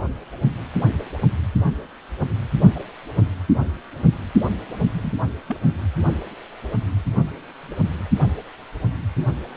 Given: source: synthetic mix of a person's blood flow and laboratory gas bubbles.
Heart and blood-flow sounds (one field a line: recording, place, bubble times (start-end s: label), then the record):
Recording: Doppler ultrasound of blood flow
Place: precordium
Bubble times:
2.75-2.81 s: bubbles
4.92-5.13 s: bubbles
5.46-5.57 s: bubbles
From the record:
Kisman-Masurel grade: 121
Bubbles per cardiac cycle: 1 to 2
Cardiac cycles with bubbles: 10 to 50%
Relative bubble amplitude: barely perceptible (0.100 to 0.250)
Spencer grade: 2 (many but less than half of the cardiac periods contain bubble signals, singularly or in groups)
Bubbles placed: anywhere in the cardiac cycle